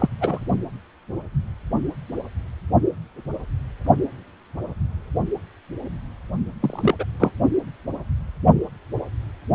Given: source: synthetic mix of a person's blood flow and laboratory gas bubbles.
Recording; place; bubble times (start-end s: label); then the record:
Doppler ultrasound of blood flow; precordium
0.00-0.08 s: bubbles
0.21-0.45 s: bubbles
6.60-6.95 s: bubbles
6.99-7.04 s: bubbles
7.20-7.32 s: bubbles
From the record:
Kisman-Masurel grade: 223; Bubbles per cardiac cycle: several, 3 to 8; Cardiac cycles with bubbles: 10 to 50%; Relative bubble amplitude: loud (0.450 to 0.775); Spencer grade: 2 (many but less than half of the cardiac periods contain bubble signals, singularly or in groups); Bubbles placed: only in the low amplitude regions of the cardiac cycle